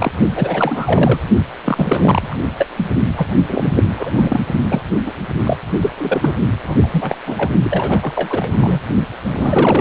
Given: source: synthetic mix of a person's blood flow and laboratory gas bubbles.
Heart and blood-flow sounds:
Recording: Doppler ultrasound of blood flow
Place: precordium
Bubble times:
0.00-0.12 s: bubbles
0.36-1.20 s: bubbles
1.64-2.36 s: bubbles
2.58-2.68 s: bubbles
2.77-2.85 s: bubbles
3.17-3.28 s: bubbles
3.49-3.72 s: bubbles
3.76-3.83 s: bubbles
3.96-4.10 s: bubbles
4.14-4.41 s: bubbles
4.69-4.81 s: bubbles
5.05-5.11 s: bubbles
5.43-5.56 s: bubbles
5.80-5.90 s: bubbles
5.97-6.33 s: bubbles
6.64-7.17 s: bubbles
7.26-7.50 s: bubbles
7.63-8.12 s: bubbles
8.16-8.80 s: bubbles
9.24-9.81 s: bubbles
From the record:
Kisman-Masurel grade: 332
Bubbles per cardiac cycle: rolling drumbeat, 9 or more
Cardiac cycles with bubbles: 50 to 99%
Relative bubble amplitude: moderate (0.250 to 0.450)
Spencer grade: 3 (all of the cardiac periods contain showers or single bubble signals, but not dominating or overriding the cardiac motion signals)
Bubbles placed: only in the low amplitude regions of the cardiac cycle

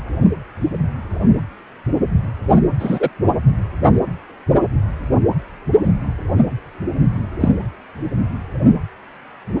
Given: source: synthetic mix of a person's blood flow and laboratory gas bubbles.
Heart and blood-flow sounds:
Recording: Doppler ultrasound of blood flow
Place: precordium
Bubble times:
2.79-3.10 s: bubbles
7.40-7.49 s: bubbles
From the record:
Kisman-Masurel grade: 113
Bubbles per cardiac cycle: 1 to 2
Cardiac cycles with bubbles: 1 to 10%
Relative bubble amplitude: loud (0.450 to 0.775)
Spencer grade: 1 (occasional bubble signal discernible with the cardiac motion signal, with majority of cardiac periods free of bubbles)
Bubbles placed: anywhere in the cardiac cycle

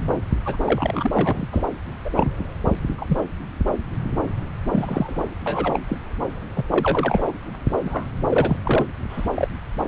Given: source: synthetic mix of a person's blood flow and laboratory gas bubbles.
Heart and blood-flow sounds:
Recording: Doppler ultrasound of blood flow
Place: subclavian vein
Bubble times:
0.45-0.56 s: bubbles
0.64-1.48 s: bubbles
1.51-1.63 s: bubbles
2.05-2.10 s: bubbles
2.16-2.32 s: bubbles
2.98-3.18 s: bubbles
4.72-5.29 s: bubbles
5.46-5.80 s: bubbles
5.88-5.97 s: bubbles
6.56-6.64 s: bubbles
6.70-7.32 s: bubbles
7.54-7.56 s: bubbles
7.78-8.09 s: bubbles
8.29-8.57 s: bubbles
8.64-8.85 s: bubbles
9.10-9.29 s: bubbles
9.36-9.47 s: bubbles
From the record:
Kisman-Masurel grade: 232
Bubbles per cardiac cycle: several, 3 to 8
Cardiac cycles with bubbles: 50 to 99%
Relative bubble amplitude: moderate (0.250 to 0.450)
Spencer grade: 3 (all of the cardiac periods contain showers or single bubble signals, but not dominating or overriding the cardiac motion signals)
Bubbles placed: anywhere in the cardiac cycle

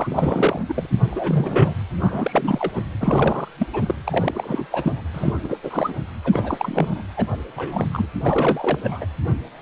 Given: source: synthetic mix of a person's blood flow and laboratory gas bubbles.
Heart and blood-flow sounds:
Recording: Doppler ultrasound of blood flow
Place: precordium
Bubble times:
0.00-0.08 s: bubbles
0.11-0.61 s: bubbles
0.68-0.86 s: bubbles
1.11-1.74 s: bubbles
1.99-2.72 s: bubbles
2.75-2.82 s: bubbles
3.00-3.48 s: bubbles
3.59-3.67 s: bubbles
3.73-3.95 s: bubbles
4.04-4.66 s: bubbles
4.71-5.01 s: bubbles
5.13-5.34 s: bubbles
5.44-5.58 s: bubbles
5.63-5.94 s: bubbles
6.24-7.03 s: bubbles
7.17-7.26 s: bubbles
7.32-7.37 s: bubbles
7.56-8.06 s: bubbles
8.23-8.78 s: bubbles
8.84-9.06 s: bubbles
From the record:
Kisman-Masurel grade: 332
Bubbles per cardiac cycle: rolling drumbeat, 9 or more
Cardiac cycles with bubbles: 50 to 99%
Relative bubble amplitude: moderate (0.250 to 0.450)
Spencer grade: 3 (all of the cardiac periods contain showers or single bubble signals, but not dominating or overriding the cardiac motion signals)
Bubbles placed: anywhere in the cardiac cycle

